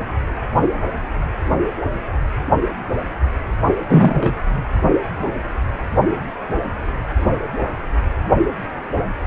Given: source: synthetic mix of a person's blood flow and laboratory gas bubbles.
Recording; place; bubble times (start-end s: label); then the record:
Doppler ultrasound of blood flow; precordium
3.89-4.33 s: bubbles
From the record:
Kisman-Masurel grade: 113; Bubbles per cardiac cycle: 1 to 2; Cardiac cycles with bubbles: 1 to 10%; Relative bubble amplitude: loud (0.450 to 0.775); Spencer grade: 1 (occasional bubble signal discernible with the cardiac motion signal, with majority of cardiac periods free of bubbles); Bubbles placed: only in the low amplitude regions of the cardiac cycle